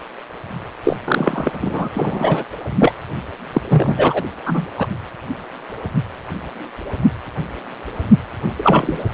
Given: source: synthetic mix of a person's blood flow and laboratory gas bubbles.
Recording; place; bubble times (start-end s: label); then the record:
Doppler ultrasound of blood flow; precordium
0.83-0.97 s: bubbles
1.05-1.51 s: bubbles
1.61-1.89 s: bubbles
1.94-2.44 s: bubbles
2.79-2.94 s: bubbles
3.53-3.61 s: bubbles
3.69-4.23 s: bubbles
4.46-4.67 s: bubbles
4.78-4.87 s: bubbles
8.57-9.04 s: bubbles
From the record:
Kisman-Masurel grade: 223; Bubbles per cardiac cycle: several, 3 to 8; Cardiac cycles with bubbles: 10 to 50%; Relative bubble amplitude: loud (0.450 to 0.775); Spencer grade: 2 (many but less than half of the cardiac periods contain bubble signals, singularly or in groups); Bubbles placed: anywhere in the cardiac cycle